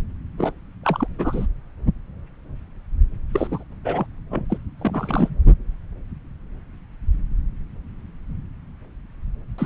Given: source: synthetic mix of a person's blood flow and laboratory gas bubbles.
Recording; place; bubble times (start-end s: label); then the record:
Doppler ultrasound of blood flow; subclavian vein
0.38-0.52 s: bubbles
0.83-1.07 s: bubbles
1.19-1.46 s: bubbles
3.33-3.64 s: bubbles
3.85-4.07 s: bubbles
4.31-4.45 s: bubbles
4.50-4.58 s: bubbles
4.78-5.36 s: bubbles
9.58-9.66 s: bubbles
From the record:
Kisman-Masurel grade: 222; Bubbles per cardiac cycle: several, 3 to 8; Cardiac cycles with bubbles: 10 to 50%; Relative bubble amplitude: moderate (0.250 to 0.450); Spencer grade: 2 (many but less than half of the cardiac periods contain bubble signals, singularly or in groups); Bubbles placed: anywhere in the cardiac cycle